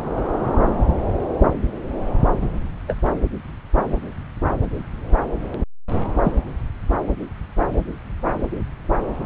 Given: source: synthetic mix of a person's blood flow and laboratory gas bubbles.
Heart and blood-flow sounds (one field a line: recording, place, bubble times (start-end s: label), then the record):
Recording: Doppler ultrasound of blood flow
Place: subclavian vein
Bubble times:
2.41-2.50 s: bubbles
2.88-2.95 s: bubbles
6.23-6.32 s: bubbles
From the record:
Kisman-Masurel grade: 122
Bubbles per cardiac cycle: 1 to 2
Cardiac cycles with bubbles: 10 to 50%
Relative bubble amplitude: moderate (0.250 to 0.450)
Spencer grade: 2 (many but less than half of the cardiac periods contain bubble signals, singularly or in groups)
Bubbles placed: anywhere in the cardiac cycle